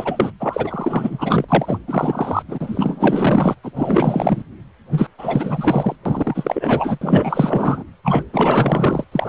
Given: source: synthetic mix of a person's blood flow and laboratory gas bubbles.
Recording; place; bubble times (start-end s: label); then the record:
Doppler ultrasound of blood flow; precordium
0.00-0.31 s: bubbles
0.40-1.45 s: bubbles
1.48-1.78 s: bubbles
1.88-2.42 s: bubbles
2.48-3.55 s: bubbles
3.63-3.71 s: bubbles
3.75-4.42 s: bubbles
4.91-5.08 s: bubbles
5.18-5.96 s: bubbles
6.05-6.98 s: bubbles
7.01-7.83 s: bubbles
8.04-8.25 s: bubbles
8.32-9.04 s: bubbles
9.12-9.29 s: bubbles
From the record:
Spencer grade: 4 (maximum detectable bubble signal sounding continuously throughout systole and diastole of every cardiac period, and overriding the amplitude of the normal cardiac signals); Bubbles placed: anywhere in the cardiac cycle